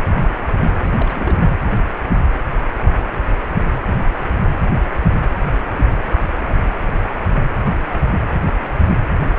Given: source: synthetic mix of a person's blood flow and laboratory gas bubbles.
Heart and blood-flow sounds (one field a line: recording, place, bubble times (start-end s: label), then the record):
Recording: Doppler ultrasound of blood flow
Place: precordium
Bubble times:
0.79-1.36 s: bubbles
From the record:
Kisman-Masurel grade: 211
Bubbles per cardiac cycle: several, 3 to 8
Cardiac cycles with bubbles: 1 to 10%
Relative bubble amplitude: barely perceptible (0.100 to 0.250)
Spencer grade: 1 (occasional bubble signal discernible with the cardiac motion signal, with majority of cardiac periods free of bubbles)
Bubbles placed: anywhere in the cardiac cycle